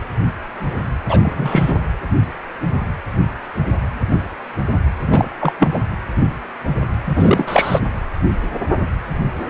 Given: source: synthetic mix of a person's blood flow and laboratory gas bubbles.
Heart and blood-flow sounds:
Doppler ultrasound of blood flow; precordium
1.08-1.81 s: bubbles
5.12-5.26 s: bubbles
5.41-5.53 s: bubbles
5.58-5.79 s: bubbles
7.05-7.80 s: bubbles
From the record:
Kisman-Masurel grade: 223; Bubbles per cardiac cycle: several, 3 to 8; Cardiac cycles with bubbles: 10 to 50%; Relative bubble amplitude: loud (0.450 to 0.775); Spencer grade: 2 (many but less than half of the cardiac periods contain bubble signals, singularly or in groups); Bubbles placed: anywhere in the cardiac cycle

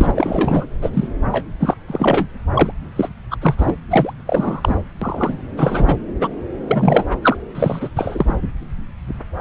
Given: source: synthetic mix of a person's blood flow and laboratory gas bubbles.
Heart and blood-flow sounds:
Doppler ultrasound of blood flow; subclavian vein
0.00-0.12 s: bubbles
0.15-0.68 s: bubbles
0.82-0.90 s: bubbles
0.94-1.07 s: bubbles
1.32-1.45 s: bubbles
1.59-1.76 s: bubbles
1.88-2.28 s: bubbles
2.54-2.71 s: bubbles
2.96-3.09 s: bubbles
3.30-3.36 s: bubbles
3.40-3.55 s: bubbles
3.57-3.74 s: bubbles
3.90-4.13 s: bubbles
4.27-4.76 s: bubbles
5.02-5.39 s: bubbles
5.57-5.98 s: bubbles
6.21-6.28 s: bubbles
6.68-7.04 s: bubbles
7.21-7.37 s: bubbles
7.55-7.89 s: bubbles
7.96-8.34 s: bubbles
From the record:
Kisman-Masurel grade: 333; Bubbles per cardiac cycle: rolling drumbeat, 9 or more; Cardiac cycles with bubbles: 50 to 99%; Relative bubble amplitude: loud (0.450 to 0.775); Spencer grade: 3 (all of the cardiac periods contain showers or single bubble signals, but not dominating or overriding the cardiac motion signals); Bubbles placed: anywhere in the cardiac cycle

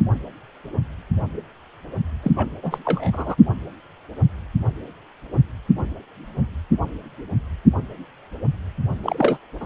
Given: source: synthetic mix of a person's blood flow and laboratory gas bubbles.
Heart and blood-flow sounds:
Doppler ultrasound of blood flow; precordium
2.23-2.31 s: bubbles
2.36-2.48 s: bubbles
2.62-2.78 s: bubbles
2.85-3.35 s: bubbles
9.03-9.38 s: bubbles
9.60-9.66 s: bubbles
From the record:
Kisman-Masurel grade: 222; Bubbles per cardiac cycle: several, 3 to 8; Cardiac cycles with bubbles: 10 to 50%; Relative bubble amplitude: moderate (0.250 to 0.450); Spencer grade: 2 (many but less than half of the cardiac periods contain bubble signals, singularly or in groups); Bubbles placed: only in the low amplitude regions of the cardiac cycle

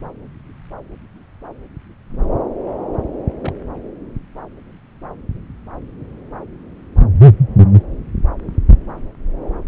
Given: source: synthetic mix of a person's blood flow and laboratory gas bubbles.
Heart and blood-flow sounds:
Doppler ultrasound of blood flow; subclavian vein
3.40-3.52 s: bubbles
From the record:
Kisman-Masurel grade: 111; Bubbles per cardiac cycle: 1 to 2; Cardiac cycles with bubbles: 1 to 10%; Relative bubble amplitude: barely perceptible (0.100 to 0.250); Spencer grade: 1 (occasional bubble signal discernible with the cardiac motion signal, with majority of cardiac periods free of bubbles); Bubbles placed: anywhere in the cardiac cycle

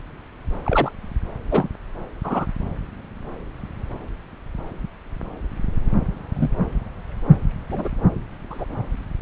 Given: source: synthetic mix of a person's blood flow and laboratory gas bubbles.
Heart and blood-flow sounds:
Doppler ultrasound of blood flow; subclavian vein
0.64-0.92 s: bubbles
1.51-1.69 s: bubbles
2.23-2.46 s: bubbles
6.34-6.49 s: bubbles
7.71-7.89 s: bubbles
8.50-8.64 s: bubbles
From the record:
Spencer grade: 2 (many but less than half of the cardiac periods contain bubble signals, singularly or in groups); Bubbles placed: anywhere in the cardiac cycle

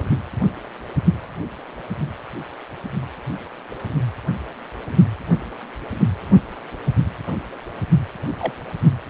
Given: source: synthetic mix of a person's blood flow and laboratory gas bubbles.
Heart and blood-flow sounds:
Doppler ultrasound of blood flow; precordium
8.40-8.53 s: bubbles
From the record:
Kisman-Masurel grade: 112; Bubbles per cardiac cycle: 1 to 2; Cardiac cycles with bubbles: 1 to 10%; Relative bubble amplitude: moderate (0.250 to 0.450); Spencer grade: 1 (occasional bubble signal discernible with the cardiac motion signal, with majority of cardiac periods free of bubbles); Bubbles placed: anywhere in the cardiac cycle

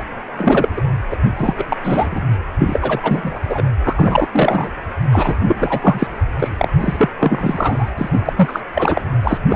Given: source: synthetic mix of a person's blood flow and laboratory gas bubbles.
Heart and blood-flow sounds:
Doppler ultrasound of blood flow; precordium
0.00-0.02 s: bubbles
0.36-0.68 s: bubbles
0.76-0.82 s: bubbles
1.10-1.18 s: bubbles
1.35-1.54 s: bubbles
1.57-1.65 s: bubbles
1.69-1.76 s: bubbles
1.84-2.22 s: bubbles
2.58-3.00 s: bubbles
3.03-3.39 s: bubbles
3.49-3.63 s: bubbles
3.82-4.28 s: bubbles
4.31-4.70 s: bubbles
5.11-5.34 s: bubbles
5.47-6.08 s: bubbles
6.39-6.49 s: bubbles
6.58-6.68 s: bubbles
6.80-7.09 s: bubbles
7.19-7.90 s: bubbles
7.98-8.09 s: bubbles
8.12-8.33 s: bubbles
8.36-8.61 s: bubbles
8.74-9.02 s: bubbles
9.23-9.38 s: bubbles
9.50-9.55 s: bubbles
From the record:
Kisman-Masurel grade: 343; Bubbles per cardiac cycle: rolling drumbeat, 9 or more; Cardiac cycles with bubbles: 100%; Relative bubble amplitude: loud (0.450 to 0.775); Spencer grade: 3 (all of the cardiac periods contain showers or single bubble signals, but not dominating or overriding the cardiac motion signals); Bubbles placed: anywhere in the cardiac cycle

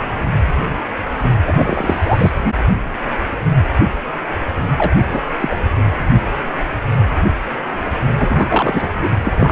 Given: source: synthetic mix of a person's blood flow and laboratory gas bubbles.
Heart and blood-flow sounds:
Doppler ultrasound of blood flow; precordium
1.45-2.32 s: bubbles
4.78-4.91 s: bubbles
5.11-5.21 s: bubbles
5.41-5.57 s: bubbles
8.19-8.88 s: bubbles
8.98-9.09 s: bubbles
9.23-9.52 s: bubbles
From the record:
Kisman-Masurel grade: 223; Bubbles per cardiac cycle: several, 3 to 8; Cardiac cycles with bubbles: 10 to 50%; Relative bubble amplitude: loud (0.450 to 0.775); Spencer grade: 2 (many but less than half of the cardiac periods contain bubble signals, singularly or in groups); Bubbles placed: anywhere in the cardiac cycle

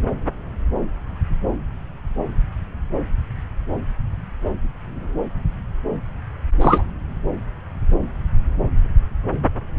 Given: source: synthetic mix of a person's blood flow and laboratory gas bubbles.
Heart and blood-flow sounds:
Doppler ultrasound of blood flow; subclavian vein
6.61-6.83 s: bubbles
From the record:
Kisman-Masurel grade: 113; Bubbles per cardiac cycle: 1 to 2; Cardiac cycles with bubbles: 1 to 10%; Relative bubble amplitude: loud (0.450 to 0.775); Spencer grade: 1 (occasional bubble signal discernible with the cardiac motion signal, with majority of cardiac periods free of bubbles); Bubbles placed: anywhere in the cardiac cycle

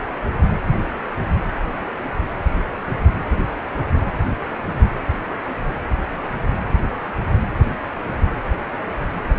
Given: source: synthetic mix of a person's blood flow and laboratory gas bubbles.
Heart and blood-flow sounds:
Doppler ultrasound of blood flow; precordium
0.47-0.52 s: bubbles
From the record:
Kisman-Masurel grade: 111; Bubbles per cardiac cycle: 1 to 2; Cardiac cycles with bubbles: 1 to 10%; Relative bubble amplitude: barely perceptible (0.100 to 0.250); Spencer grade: 1 (occasional bubble signal discernible with the cardiac motion signal, with majority of cardiac periods free of bubbles); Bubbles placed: anywhere in the cardiac cycle

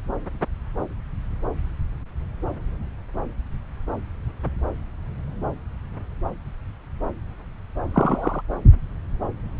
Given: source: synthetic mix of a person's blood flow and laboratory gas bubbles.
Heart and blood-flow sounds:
Doppler ultrasound of blood flow; subclavian vein
7.94-8.42 s: bubbles
From the record:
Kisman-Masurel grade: 113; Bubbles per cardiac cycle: 1 to 2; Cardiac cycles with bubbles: 1 to 10%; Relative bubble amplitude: loud (0.450 to 0.775); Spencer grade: 1 (occasional bubble signal discernible with the cardiac motion signal, with majority of cardiac periods free of bubbles); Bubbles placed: anywhere in the cardiac cycle

